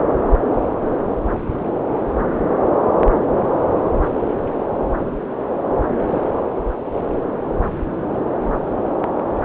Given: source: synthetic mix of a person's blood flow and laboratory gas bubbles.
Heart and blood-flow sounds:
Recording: Doppler ultrasound of blood flow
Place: subclavian vein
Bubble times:
6.07-6.22 s: bubbles
From the record:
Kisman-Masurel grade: 111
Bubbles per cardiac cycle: 1 to 2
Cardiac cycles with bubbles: 1 to 10%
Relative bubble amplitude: barely perceptible (0.100 to 0.250)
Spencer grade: 1 (occasional bubble signal discernible with the cardiac motion signal, with majority of cardiac periods free of bubbles)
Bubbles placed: anywhere in the cardiac cycle

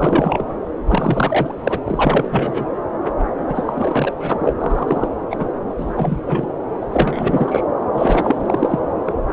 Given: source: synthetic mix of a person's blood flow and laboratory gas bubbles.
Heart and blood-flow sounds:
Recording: Doppler ultrasound of blood flow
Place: subclavian vein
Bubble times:
0.00-0.54 s: bubbles
0.86-1.54 s: bubbles
1.64-1.80 s: bubbles
1.87-2.66 s: bubbles
3.47-4.53 s: bubbles
4.60-5.08 s: bubbles
5.29-5.48 s: bubbles
5.78-6.17 s: bubbles
6.25-6.47 s: bubbles
6.81-6.86 s: bubbles
6.92-7.61 s: bubbles
7.94-8.79 s: bubbles
9.05-9.13 s: bubbles
From the record:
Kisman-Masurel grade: 333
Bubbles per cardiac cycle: rolling drumbeat, 9 or more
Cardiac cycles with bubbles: 50 to 99%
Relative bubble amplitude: loud (0.450 to 0.775)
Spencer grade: 3 (all of the cardiac periods contain showers or single bubble signals, but not dominating or overriding the cardiac motion signals)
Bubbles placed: anywhere in the cardiac cycle

